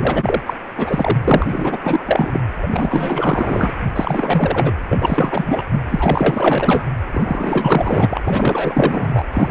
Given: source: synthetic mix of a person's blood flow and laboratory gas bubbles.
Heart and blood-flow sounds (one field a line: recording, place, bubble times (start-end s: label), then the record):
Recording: Doppler ultrasound of blood flow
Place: precordium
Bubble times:
0.00-0.41 s: bubbles
0.46-0.53 s: bubbles
0.77-1.18 s: bubbles
1.24-1.46 s: bubbles
1.49-1.78 s: bubbles
1.83-2.44 s: bubbles
2.62-3.70 s: bubbles
3.95-4.73 s: bubbles
4.89-5.63 s: bubbles
5.71-5.79 s: bubbles
5.90-6.84 s: bubbles
7.12-8.21 s: bubbles
8.25-9.25 s: bubbles
9.31-9.51 s: bubbles
From the record:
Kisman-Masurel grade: 444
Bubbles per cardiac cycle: continuous sound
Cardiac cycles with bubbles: 100%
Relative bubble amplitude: maximal (0.775 to 0.999)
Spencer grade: 4 (maximum detectable bubble signal sounding continuously throughout systole and diastole of every cardiac period, and overriding the amplitude of the normal cardiac signals)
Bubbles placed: anywhere in the cardiac cycle